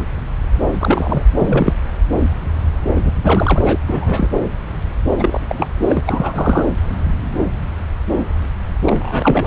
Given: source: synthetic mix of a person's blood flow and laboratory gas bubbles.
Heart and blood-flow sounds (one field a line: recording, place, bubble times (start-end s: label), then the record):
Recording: Doppler ultrasound of blood flow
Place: subclavian vein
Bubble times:
0.72-1.23 s: bubbles
1.37-1.74 s: bubbles
2.96-3.12 s: bubbles
3.24-4.29 s: bubbles
5.19-5.46 s: bubbles
5.49-5.67 s: bubbles
5.87-6.00 s: bubbles
6.06-6.67 s: bubbles
8.85-9.47 s: bubbles
From the record:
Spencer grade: 3 (all of the cardiac periods contain showers or single bubble signals, but not dominating or overriding the cardiac motion signals)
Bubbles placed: anywhere in the cardiac cycle